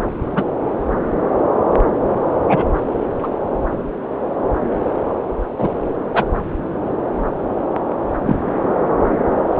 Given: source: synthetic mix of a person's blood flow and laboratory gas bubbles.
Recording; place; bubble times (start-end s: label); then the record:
Doppler ultrasound of blood flow; subclavian vein
0.35-0.44 s: bubbles
2.48-2.64 s: bubbles
3.23-3.28 s: bubbles
5.58-5.69 s: bubbles
6.13-6.24 s: bubbles
8.25-8.37 s: bubbles
From the record:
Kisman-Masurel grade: 123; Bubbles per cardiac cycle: 1 to 2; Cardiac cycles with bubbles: 10 to 50%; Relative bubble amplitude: loud (0.450 to 0.775); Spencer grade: 2 (many but less than half of the cardiac periods contain bubble signals, singularly or in groups); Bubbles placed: anywhere in the cardiac cycle